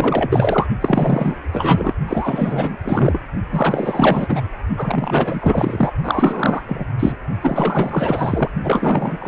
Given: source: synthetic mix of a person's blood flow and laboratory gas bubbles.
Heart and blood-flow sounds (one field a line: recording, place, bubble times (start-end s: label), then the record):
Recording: Doppler ultrasound of blood flow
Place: precordium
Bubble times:
0.00-0.67 s: bubbles
0.80-1.36 s: bubbles
1.52-1.94 s: bubbles
2.08-2.76 s: bubbles
2.84-3.19 s: bubbles
3.52-4.41 s: bubbles
4.76-5.93 s: bubbles
6.03-6.62 s: bubbles
6.68-6.85 s: bubbles
6.99-7.16 s: bubbles
7.41-8.51 s: bubbles
8.64-9.28 s: bubbles
From the record:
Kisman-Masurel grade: 444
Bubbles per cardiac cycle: continuous sound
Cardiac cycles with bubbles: 100%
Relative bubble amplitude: maximal (0.775 to 0.999)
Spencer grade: 4 (maximum detectable bubble signal sounding continuously throughout systole and diastole of every cardiac period, and overriding the amplitude of the normal cardiac signals)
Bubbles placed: only in the low amplitude regions of the cardiac cycle